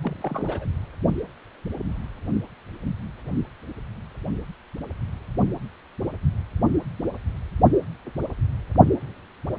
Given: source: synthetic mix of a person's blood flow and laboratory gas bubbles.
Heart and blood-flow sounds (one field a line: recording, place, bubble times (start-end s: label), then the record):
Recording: Doppler ultrasound of blood flow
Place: precordium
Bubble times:
0.02-0.67 s: bubbles
From the record:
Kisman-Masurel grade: 221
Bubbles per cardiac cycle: several, 3 to 8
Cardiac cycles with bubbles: 10 to 50%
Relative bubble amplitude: barely perceptible (0.100 to 0.250)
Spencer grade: 2 (many but less than half of the cardiac periods contain bubble signals, singularly or in groups)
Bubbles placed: only in the low amplitude regions of the cardiac cycle